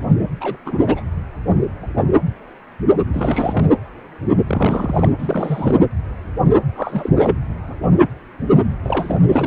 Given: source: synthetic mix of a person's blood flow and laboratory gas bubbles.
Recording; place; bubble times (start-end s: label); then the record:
Doppler ultrasound of blood flow; precordium
0.40-0.57 s: bubbles
0.66-1.03 s: bubbles
3.13-3.69 s: bubbles
4.47-5.12 s: bubbles
5.18-5.75 s: bubbles
6.75-7.13 s: bubbles
7.16-7.36 s: bubbles
8.84-9.27 s: bubbles
9.32-9.46 s: bubbles
From the record:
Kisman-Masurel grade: 332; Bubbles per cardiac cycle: rolling drumbeat, 9 or more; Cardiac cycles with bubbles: 50 to 99%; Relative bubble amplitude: moderate (0.250 to 0.450); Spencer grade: 3 (all of the cardiac periods contain showers or single bubble signals, but not dominating or overriding the cardiac motion signals); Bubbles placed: anywhere in the cardiac cycle